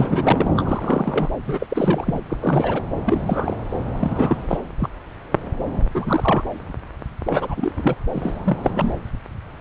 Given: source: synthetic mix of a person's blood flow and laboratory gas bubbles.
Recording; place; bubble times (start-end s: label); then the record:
Doppler ultrasound of blood flow; subclavian vein
0.00-0.50 s: bubbles
0.56-1.29 s: bubbles
1.46-1.67 s: bubbles
1.70-2.20 s: bubbles
2.30-2.37 s: bubbles
2.41-2.83 s: bubbles
3.06-3.72 s: bubbles
4.00-4.37 s: bubbles
4.48-4.58 s: bubbles
4.79-4.88 s: bubbles
5.94-6.44 s: bubbles
7.26-7.73 s: bubbles
7.77-7.95 s: bubbles
8.13-8.71 s: bubbles
8.75-8.94 s: bubbles
From the record:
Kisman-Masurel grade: 332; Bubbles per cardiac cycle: rolling drumbeat, 9 or more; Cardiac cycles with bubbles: 50 to 99%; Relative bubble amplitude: moderate (0.250 to 0.450); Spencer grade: 3 (all of the cardiac periods contain showers or single bubble signals, but not dominating or overriding the cardiac motion signals); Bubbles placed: anywhere in the cardiac cycle